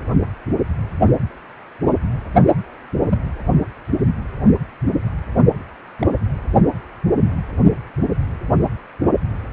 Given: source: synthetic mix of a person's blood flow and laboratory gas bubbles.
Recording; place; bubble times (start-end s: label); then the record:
Doppler ultrasound of blood flow; precordium
3.10-3.18 s: bubbles
5.99-6.07 s: bubbles
From the record:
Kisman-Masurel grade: 122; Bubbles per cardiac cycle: 1 to 2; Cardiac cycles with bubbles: 10 to 50%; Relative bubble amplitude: moderate (0.250 to 0.450); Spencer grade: 2 (many but less than half of the cardiac periods contain bubble signals, singularly or in groups); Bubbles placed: only in the low amplitude regions of the cardiac cycle